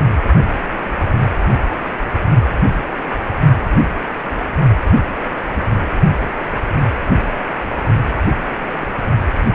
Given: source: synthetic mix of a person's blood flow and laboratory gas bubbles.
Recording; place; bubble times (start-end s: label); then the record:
Doppler ultrasound of blood flow; precordium
1.40-1.48 s: bubbles
4.86-4.92 s: bubbles
5.54-5.63 s: bubbles
8.81-8.86 s: bubbles
From the record:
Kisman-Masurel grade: 121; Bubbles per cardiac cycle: 1 to 2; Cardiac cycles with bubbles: 10 to 50%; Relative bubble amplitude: barely perceptible (0.100 to 0.250); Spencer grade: 2 (many but less than half of the cardiac periods contain bubble signals, singularly or in groups); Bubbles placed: only in the low amplitude regions of the cardiac cycle